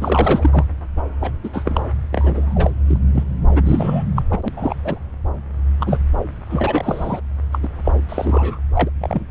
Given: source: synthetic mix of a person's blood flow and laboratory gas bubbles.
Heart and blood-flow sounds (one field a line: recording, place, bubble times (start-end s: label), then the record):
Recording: Doppler ultrasound of blood flow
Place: subclavian vein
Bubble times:
0.01-0.64 s: bubbles
1.21-1.33 s: bubbles
1.43-1.50 s: bubbles
1.53-1.82 s: bubbles
2.12-2.71 s: bubbles
2.87-2.98 s: bubbles
3.15-3.23 s: bubbles
3.50-3.61 s: bubbles
3.66-4.04 s: bubbles
4.16-4.22 s: bubbles
4.30-4.39 s: bubbles
4.42-4.49 s: bubbles
4.56-4.75 s: bubbles
4.83-4.99 s: bubbles
5.80-5.98 s: bubbles
6.49-7.20 s: bubbles
7.52-7.59 s: bubbles
7.62-7.68 s: bubbles
7.84-7.92 s: bubbles
8.09-8.59 s: bubbles
8.75-8.90 s: bubbles
9.01-9.26 s: bubbles
From the record:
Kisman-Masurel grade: 242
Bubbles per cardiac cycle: several, 3 to 8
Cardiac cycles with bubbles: 100%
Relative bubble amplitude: moderate (0.250 to 0.450)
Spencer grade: 3 (all of the cardiac periods contain showers or single bubble signals, but not dominating or overriding the cardiac motion signals)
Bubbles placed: anywhere in the cardiac cycle